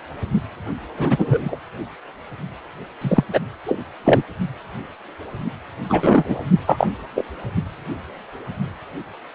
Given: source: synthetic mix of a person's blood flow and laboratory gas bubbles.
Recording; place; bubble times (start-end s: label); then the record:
Doppler ultrasound of blood flow; precordium
0.97-1.56 s: bubbles
3.01-3.24 s: bubbles
3.33-3.40 s: bubbles
3.66-3.78 s: bubbles
4.04-4.23 s: bubbles
5.89-6.46 s: bubbles
6.66-6.87 s: bubbles
7.16-7.23 s: bubbles
From the record:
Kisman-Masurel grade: 223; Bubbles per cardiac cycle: several, 3 to 8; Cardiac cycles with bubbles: 10 to 50%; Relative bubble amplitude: loud (0.450 to 0.775); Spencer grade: 2 (many but less than half of the cardiac periods contain bubble signals, singularly or in groups); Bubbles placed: anywhere in the cardiac cycle